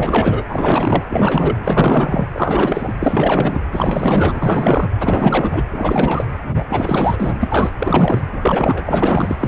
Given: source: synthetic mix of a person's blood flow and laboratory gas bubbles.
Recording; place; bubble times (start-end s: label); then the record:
Doppler ultrasound of blood flow; precordium
0.00-0.43 s: bubbles
0.49-1.04 s: bubbles
1.10-1.58 s: bubbles
1.64-2.27 s: bubbles
2.32-2.96 s: bubbles
3.00-3.60 s: bubbles
3.72-4.90 s: bubbles
5.00-5.64 s: bubbles
5.71-6.27 s: bubbles
6.51-6.64 s: bubbles
6.69-7.39 s: bubbles
7.41-7.71 s: bubbles
7.79-8.22 s: bubbles
8.32-9.36 s: bubbles
9.39-9.48 s: bubbles
From the record:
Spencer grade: 4 (maximum detectable bubble signal sounding continuously throughout systole and diastole of every cardiac period, and overriding the amplitude of the normal cardiac signals); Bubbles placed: anywhere in the cardiac cycle